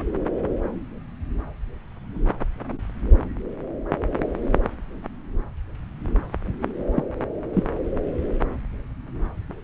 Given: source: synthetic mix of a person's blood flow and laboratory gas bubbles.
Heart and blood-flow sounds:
Doppler ultrasound of blood flow; subclavian vein
6.96-7.03 s: bubbles
7.54-7.63 s: bubbles
From the record:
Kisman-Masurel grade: 112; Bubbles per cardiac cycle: 1 to 2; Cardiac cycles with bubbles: 1 to 10%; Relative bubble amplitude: moderate (0.250 to 0.450); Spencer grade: 1 (occasional bubble signal discernible with the cardiac motion signal, with majority of cardiac periods free of bubbles); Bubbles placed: anywhere in the cardiac cycle

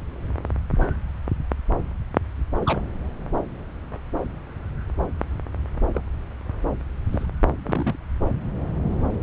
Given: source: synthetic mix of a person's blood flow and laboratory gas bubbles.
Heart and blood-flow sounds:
Doppler ultrasound of blood flow; subclavian vein
2.59-2.81 s: bubbles
5.95-6.03 s: bubbles
7.11-7.26 s: bubbles
7.62-7.96 s: bubbles
From the record:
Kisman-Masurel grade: 122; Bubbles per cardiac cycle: 1 to 2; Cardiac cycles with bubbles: 10 to 50%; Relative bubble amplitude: moderate (0.250 to 0.450); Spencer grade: 2 (many but less than half of the cardiac periods contain bubble signals, singularly or in groups); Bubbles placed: anywhere in the cardiac cycle

